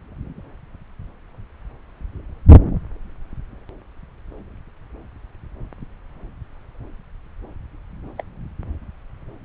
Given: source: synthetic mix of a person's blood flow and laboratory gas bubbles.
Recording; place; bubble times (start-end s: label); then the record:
Doppler ultrasound of blood flow; subclavian vein
8.18-8.22 s: bubbles
From the record:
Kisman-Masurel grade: 111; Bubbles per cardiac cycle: 1 to 2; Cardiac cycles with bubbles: 1 to 10%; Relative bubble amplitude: barely perceptible (0.100 to 0.250); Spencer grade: 1 (occasional bubble signal discernible with the cardiac motion signal, with majority of cardiac periods free of bubbles); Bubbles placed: anywhere in the cardiac cycle